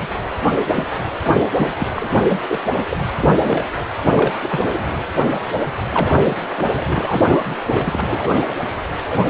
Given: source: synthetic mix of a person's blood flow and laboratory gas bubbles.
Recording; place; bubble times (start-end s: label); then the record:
Doppler ultrasound of blood flow; precordium
0.01-0.07 s: bubbles
0.70-0.84 s: bubbles
1.54-1.70 s: bubbles
1.78-1.88 s: bubbles
1.93-2.43 s: bubbles
2.48-2.59 s: bubbles
2.66-2.72 s: bubbles
2.76-2.83 s: bubbles
2.90-2.98 s: bubbles
3.22-3.65 s: bubbles
4.04-4.38 s: bubbles
4.42-4.87 s: bubbles
5.90-6.40 s: bubbles
6.50-6.70 s: bubbles
6.75-7.23 s: bubbles
7.27-7.56 s: bubbles
7.69-8.56 s: bubbles
9.10-9.27 s: bubbles
From the record:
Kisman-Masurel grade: 332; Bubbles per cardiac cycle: rolling drumbeat, 9 or more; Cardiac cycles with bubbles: 50 to 99%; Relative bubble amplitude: moderate (0.250 to 0.450); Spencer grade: 3 (all of the cardiac periods contain showers or single bubble signals, but not dominating or overriding the cardiac motion signals); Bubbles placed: anywhere in the cardiac cycle